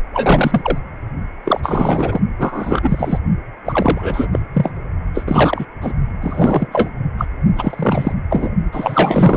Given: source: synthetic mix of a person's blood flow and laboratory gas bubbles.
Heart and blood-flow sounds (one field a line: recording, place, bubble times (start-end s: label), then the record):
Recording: Doppler ultrasound of blood flow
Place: precordium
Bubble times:
0.13-0.79 s: bubbles
1.45-2.20 s: bubbles
2.38-3.19 s: bubbles
3.66-4.27 s: bubbles
4.32-4.39 s: bubbles
4.54-4.72 s: bubbles
5.14-5.65 s: bubbles
5.81-5.92 s: bubbles
6.21-6.90 s: bubbles
7.17-7.25 s: bubbles
7.56-8.12 s: bubbles
8.30-8.50 s: bubbles
8.72-9.37 s: bubbles
From the record:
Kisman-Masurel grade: 343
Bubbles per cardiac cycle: rolling drumbeat, 9 or more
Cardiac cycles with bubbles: 100%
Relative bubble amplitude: loud (0.450 to 0.775)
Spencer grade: 3 (all of the cardiac periods contain showers or single bubble signals, but not dominating or overriding the cardiac motion signals)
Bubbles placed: only in the low amplitude regions of the cardiac cycle